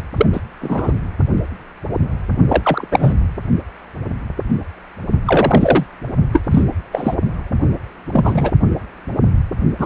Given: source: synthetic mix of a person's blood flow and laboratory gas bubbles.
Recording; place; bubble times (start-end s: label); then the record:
Doppler ultrasound of blood flow; precordium
0.17-0.26 s: bubbles
0.33-0.42 s: bubbles
0.60-0.92 s: bubbles
2.49-2.88 s: bubbles
2.91-3.13 s: bubbles
5.25-5.86 s: bubbles
6.32-6.42 s: bubbles
6.51-6.63 s: bubbles
6.92-7.14 s: bubbles
8.12-8.51 s: bubbles
9.79-9.86 s: bubbles
From the record:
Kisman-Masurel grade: 233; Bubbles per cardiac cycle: several, 3 to 8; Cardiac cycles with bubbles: 50 to 99%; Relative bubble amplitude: loud (0.450 to 0.775); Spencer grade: 3 (all of the cardiac periods contain showers or single bubble signals, but not dominating or overriding the cardiac motion signals); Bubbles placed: only in the low amplitude regions of the cardiac cycle